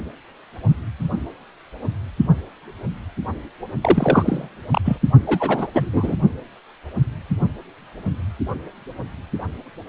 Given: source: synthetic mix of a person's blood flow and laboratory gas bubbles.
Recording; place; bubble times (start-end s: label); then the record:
Doppler ultrasound of blood flow; precordium
3.81-4.49 s: bubbles
4.70-4.81 s: bubbles
4.84-4.97 s: bubbles
5.26-5.67 s: bubbles
5.73-6.17 s: bubbles
From the record:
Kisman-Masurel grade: 222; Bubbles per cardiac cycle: several, 3 to 8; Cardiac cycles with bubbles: 10 to 50%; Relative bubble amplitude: moderate (0.250 to 0.450); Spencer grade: 2 (many but less than half of the cardiac periods contain bubble signals, singularly or in groups); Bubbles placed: only in the low amplitude regions of the cardiac cycle